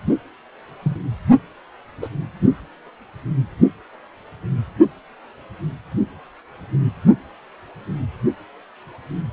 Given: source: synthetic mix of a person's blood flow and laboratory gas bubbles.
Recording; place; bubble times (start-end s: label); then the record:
Doppler ultrasound of blood flow; precordium
0.82-0.97 s: bubbles
2.02-2.09 s: bubbles
From the record:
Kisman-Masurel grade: 112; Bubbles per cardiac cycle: 1 to 2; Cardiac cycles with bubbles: 1 to 10%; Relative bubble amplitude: moderate (0.250 to 0.450); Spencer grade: 1 (occasional bubble signal discernible with the cardiac motion signal, with majority of cardiac periods free of bubbles); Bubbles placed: only in the low amplitude regions of the cardiac cycle